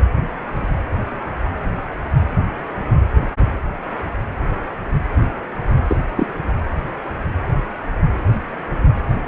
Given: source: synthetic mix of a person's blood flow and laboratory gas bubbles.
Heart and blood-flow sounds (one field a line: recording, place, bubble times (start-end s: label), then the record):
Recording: Doppler ultrasound of blood flow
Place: precordium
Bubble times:
5.88-5.96 s: bubbles
6.16-6.27 s: bubbles
From the record:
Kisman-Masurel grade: 112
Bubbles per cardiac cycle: 1 to 2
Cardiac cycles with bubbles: 1 to 10%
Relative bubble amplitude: moderate (0.250 to 0.450)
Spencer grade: 1 (occasional bubble signal discernible with the cardiac motion signal, with majority of cardiac periods free of bubbles)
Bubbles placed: anywhere in the cardiac cycle